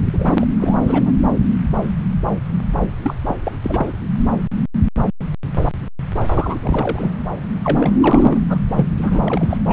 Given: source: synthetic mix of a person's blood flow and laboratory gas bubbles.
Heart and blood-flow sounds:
Doppler ultrasound of blood flow; subclavian vein
0.13-0.46 s: bubbles
0.59-0.78 s: bubbles
0.86-1.17 s: bubbles
3.02-3.15 s: bubbles
3.27-3.36 s: bubbles
3.44-3.52 s: bubbles
3.63-3.94 s: bubbles
6.34-6.58 s: bubbles
6.62-7.17 s: bubbles
7.64-8.41 s: bubbles
8.49-8.59 s: bubbles
8.75-8.87 s: bubbles
8.94-9.58 s: bubbles
9.68-9.73 s: bubbles
From the record:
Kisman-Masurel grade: 332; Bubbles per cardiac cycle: rolling drumbeat, 9 or more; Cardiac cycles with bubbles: 50 to 99%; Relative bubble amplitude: moderate (0.250 to 0.450); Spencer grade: 3 (all of the cardiac periods contain showers or single bubble signals, but not dominating or overriding the cardiac motion signals); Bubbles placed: anywhere in the cardiac cycle

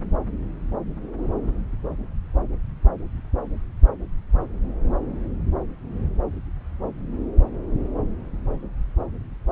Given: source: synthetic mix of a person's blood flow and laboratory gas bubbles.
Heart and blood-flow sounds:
Doppler ultrasound of blood flow; subclavian vein
no bubbles
From the record:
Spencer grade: 0 (complete lack of bubble signals)

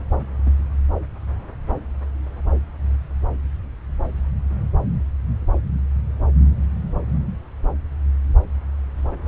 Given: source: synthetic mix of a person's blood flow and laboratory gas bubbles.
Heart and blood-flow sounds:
Doppler ultrasound of blood flow; subclavian vein
0.46-0.50 s: bubbles
From the record:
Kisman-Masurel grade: 111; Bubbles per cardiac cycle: 1 to 2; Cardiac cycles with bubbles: 1 to 10%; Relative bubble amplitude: barely perceptible (0.100 to 0.250); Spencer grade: 1 (occasional bubble signal discernible with the cardiac motion signal, with majority of cardiac periods free of bubbles); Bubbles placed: anywhere in the cardiac cycle

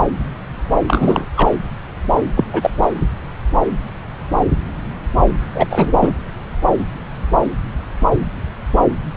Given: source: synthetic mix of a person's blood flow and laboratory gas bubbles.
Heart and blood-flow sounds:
Doppler ultrasound of blood flow; subclavian vein
0.87-1.25 s: bubbles
1.36-1.49 s: bubbles
2.37-2.44 s: bubbles
2.52-2.71 s: bubbles
2.81-2.89 s: bubbles
5.54-5.67 s: bubbles
5.70-6.12 s: bubbles
From the record:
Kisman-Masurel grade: 223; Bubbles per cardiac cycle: several, 3 to 8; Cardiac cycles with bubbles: 10 to 50%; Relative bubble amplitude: loud (0.450 to 0.775); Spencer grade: 2 (many but less than half of the cardiac periods contain bubble signals, singularly or in groups); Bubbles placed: anywhere in the cardiac cycle

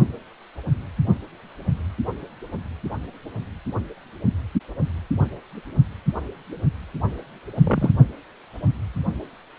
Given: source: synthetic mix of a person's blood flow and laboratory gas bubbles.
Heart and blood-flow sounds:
Doppler ultrasound of blood flow; precordium
7.54-7.91 s: bubbles
From the record:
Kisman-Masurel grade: 112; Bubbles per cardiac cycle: 1 to 2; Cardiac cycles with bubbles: 1 to 10%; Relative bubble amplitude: moderate (0.250 to 0.450); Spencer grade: 1 (occasional bubble signal discernible with the cardiac motion signal, with majority of cardiac periods free of bubbles); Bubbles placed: only in the low amplitude regions of the cardiac cycle

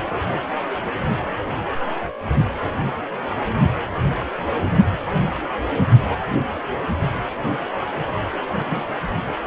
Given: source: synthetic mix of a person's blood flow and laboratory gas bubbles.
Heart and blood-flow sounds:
Doppler ultrasound of blood flow; precordium
0.07-0.15 s: bubbles
0.53-0.80 s: bubbles
0.84-0.91 s: bubbles
8.58-8.90 s: bubbles
8.99-9.04 s: bubbles
9.22-9.33 s: bubbles
From the record:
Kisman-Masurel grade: 221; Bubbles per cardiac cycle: several, 3 to 8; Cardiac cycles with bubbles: 10 to 50%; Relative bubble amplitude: barely perceptible (0.100 to 0.250); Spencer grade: 2 (many but less than half of the cardiac periods contain bubble signals, singularly or in groups); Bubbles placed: anywhere in the cardiac cycle

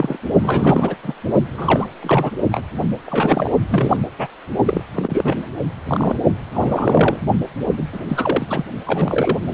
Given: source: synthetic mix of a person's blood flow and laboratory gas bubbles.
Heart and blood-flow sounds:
Doppler ultrasound of blood flow; precordium
0.00-0.18 s: bubbles
0.43-0.96 s: bubbles
1.03-1.12 s: bubbles
1.53-1.88 s: bubbles
2.02-2.31 s: bubbles
2.52-2.64 s: bubbles
3.05-3.51 s: bubbles
3.69-3.97 s: bubbles
4.18-4.27 s: bubbles
4.65-4.83 s: bubbles
4.95-5.37 s: bubbles
5.87-6.16 s: bubbles
6.54-7.20 s: bubbles
7.77-7.84 s: bubbles
7.92-8.00 s: bubbles
8.09-8.64 s: bubbles
8.87-9.38 s: bubbles
9.51-9.54 s: bubbles
From the record:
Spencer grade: 3 (all of the cardiac periods contain showers or single bubble signals, but not dominating or overriding the cardiac motion signals); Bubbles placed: only in the low amplitude regions of the cardiac cycle

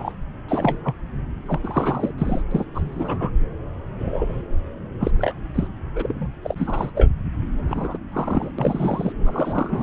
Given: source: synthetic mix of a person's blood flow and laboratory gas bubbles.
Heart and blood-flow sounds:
Doppler ultrasound of blood flow; subclavian vein
0.00-0.17 s: bubbles
0.48-0.78 s: bubbles
0.84-0.94 s: bubbles
1.46-1.60 s: bubbles
1.63-2.11 s: bubbles
2.18-2.42 s: bubbles
2.51-2.65 s: bubbles
2.75-3.31 s: bubbles
3.98-4.43 s: bubbles
5.00-5.11 s: bubbles
5.18-5.33 s: bubbles
5.55-5.68 s: bubbles
5.95-6.28 s: bubbles
6.44-6.55 s: bubbles
6.58-6.91 s: bubbles
6.95-7.11 s: bubbles
7.67-7.98 s: bubbles
8.12-8.51 s: bubbles
8.58-9.12 s: bubbles
9.24-9.82 s: bubbles
From the record:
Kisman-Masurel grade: 242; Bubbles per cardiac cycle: several, 3 to 8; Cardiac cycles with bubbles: 100%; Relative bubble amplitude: moderate (0.250 to 0.450); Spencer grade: 3 (all of the cardiac periods contain showers or single bubble signals, but not dominating or overriding the cardiac motion signals); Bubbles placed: anywhere in the cardiac cycle

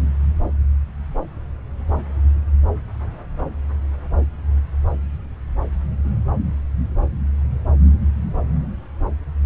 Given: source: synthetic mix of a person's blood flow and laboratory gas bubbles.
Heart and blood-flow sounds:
Doppler ultrasound of blood flow; subclavian vein
no bubbles
From the record:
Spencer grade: 0 (complete lack of bubble signals)

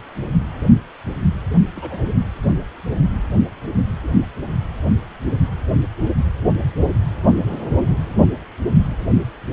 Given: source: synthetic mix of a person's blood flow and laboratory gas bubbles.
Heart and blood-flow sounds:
Doppler ultrasound of blood flow; precordium
1.76-2.08 s: bubbles
From the record:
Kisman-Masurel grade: 111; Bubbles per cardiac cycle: 1 to 2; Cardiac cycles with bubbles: 1 to 10%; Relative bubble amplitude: barely perceptible (0.100 to 0.250); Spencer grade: 1 (occasional bubble signal discernible with the cardiac motion signal, with majority of cardiac periods free of bubbles); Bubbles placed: only in the low amplitude regions of the cardiac cycle

